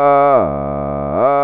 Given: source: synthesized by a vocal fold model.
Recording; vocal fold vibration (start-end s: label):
sustained vowel that changes in the middle
0.00-0.30 s: 141.7 Hz, open quotient 0.20
0.50-1.10 s: 70.6 Hz, open quotient 0.28
1.30-1.44 s: 141.7 Hz, open quotient 0.20